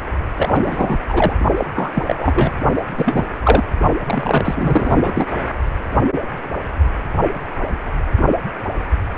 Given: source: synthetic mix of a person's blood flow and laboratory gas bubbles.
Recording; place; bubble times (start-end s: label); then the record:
Doppler ultrasound of blood flow; precordium
0.35-0.99 s: bubbles
1.08-1.33 s: bubbles
1.57-1.65 s: bubbles
1.74-2.03 s: bubbles
2.06-2.52 s: bubbles
2.75-2.82 s: bubbles
2.97-3.25 s: bubbles
3.43-3.64 s: bubbles
4.05-5.25 s: bubbles
From the record:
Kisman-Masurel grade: 333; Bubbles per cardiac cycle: rolling drumbeat, 9 or more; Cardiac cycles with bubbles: 50 to 99%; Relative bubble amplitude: loud (0.450 to 0.775); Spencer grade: 3 (all of the cardiac periods contain showers or single bubble signals, but not dominating or overriding the cardiac motion signals); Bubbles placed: only in the low amplitude regions of the cardiac cycle